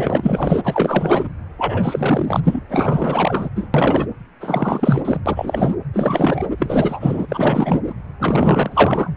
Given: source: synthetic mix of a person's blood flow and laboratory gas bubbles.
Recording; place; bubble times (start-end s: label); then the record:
Doppler ultrasound of blood flow; precordium
0.00-1.30 s: bubbles
1.58-2.40 s: bubbles
2.43-2.61 s: bubbles
2.69-3.50 s: bubbles
3.56-3.68 s: bubbles
3.74-4.06 s: bubbles
4.40-5.21 s: bubbles
5.26-5.76 s: bubbles
5.93-6.44 s: bubbles
6.57-7.26 s: bubbles
7.28-7.80 s: bubbles
7.83-7.93 s: bubbles
8.19-9.11 s: bubbles
From the record:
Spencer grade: 4 (maximum detectable bubble signal sounding continuously throughout systole and diastole of every cardiac period, and overriding the amplitude of the normal cardiac signals); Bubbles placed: anywhere in the cardiac cycle